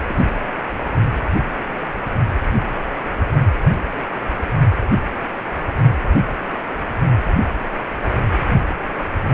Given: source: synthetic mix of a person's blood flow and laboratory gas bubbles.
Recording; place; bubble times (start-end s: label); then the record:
Doppler ultrasound of blood flow; precordium
0.08-0.24 s: bubbles
From the record:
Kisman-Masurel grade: 111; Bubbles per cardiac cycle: 1 to 2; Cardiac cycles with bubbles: 1 to 10%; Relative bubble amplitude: barely perceptible (0.100 to 0.250); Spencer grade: 1 (occasional bubble signal discernible with the cardiac motion signal, with majority of cardiac periods free of bubbles); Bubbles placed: anywhere in the cardiac cycle